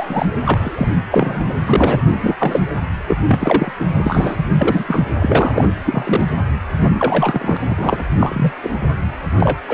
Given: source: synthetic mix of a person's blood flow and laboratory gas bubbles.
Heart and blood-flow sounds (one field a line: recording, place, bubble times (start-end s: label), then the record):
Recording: Doppler ultrasound of blood flow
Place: precordium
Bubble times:
0.00-0.26 s: bubbles
0.46-0.95 s: bubbles
1.11-1.53 s: bubbles
1.66-2.04 s: bubbles
2.21-2.35 s: bubbles
2.40-2.60 s: bubbles
3.07-3.17 s: bubbles
3.27-3.72 s: bubbles
3.79-3.86 s: bubbles
3.98-4.44 s: bubbles
4.58-4.83 s: bubbles
4.88-5.05 s: bubbles
5.18-5.68 s: bubbles
5.84-6.27 s: bubbles
6.82-7.57 s: bubbles
7.67-8.04 s: bubbles
8.20-8.53 s: bubbles
8.63-8.71 s: bubbles
9.40-9.57 s: bubbles
9.68-9.74 s: bubbles
From the record:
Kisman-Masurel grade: 243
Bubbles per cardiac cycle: several, 3 to 8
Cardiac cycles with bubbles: 100%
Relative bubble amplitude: loud (0.450 to 0.775)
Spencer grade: 3 (all of the cardiac periods contain showers or single bubble signals, but not dominating or overriding the cardiac motion signals)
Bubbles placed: anywhere in the cardiac cycle